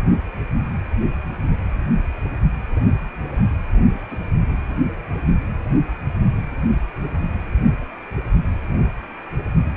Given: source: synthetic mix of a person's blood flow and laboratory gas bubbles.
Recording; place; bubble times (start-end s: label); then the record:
Doppler ultrasound of blood flow; precordium
4.11-4.17 s: bubbles
From the record:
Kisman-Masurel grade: 111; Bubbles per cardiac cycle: 1 to 2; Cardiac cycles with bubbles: 1 to 10%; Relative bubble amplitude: barely perceptible (0.100 to 0.250); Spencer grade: 1 (occasional bubble signal discernible with the cardiac motion signal, with majority of cardiac periods free of bubbles); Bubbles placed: anywhere in the cardiac cycle